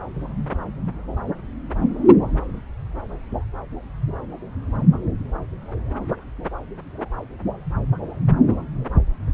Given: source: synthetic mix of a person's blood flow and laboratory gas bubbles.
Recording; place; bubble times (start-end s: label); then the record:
Doppler ultrasound of blood flow; subclavian vein
no bubbles
From the record:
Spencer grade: 0 (complete lack of bubble signals)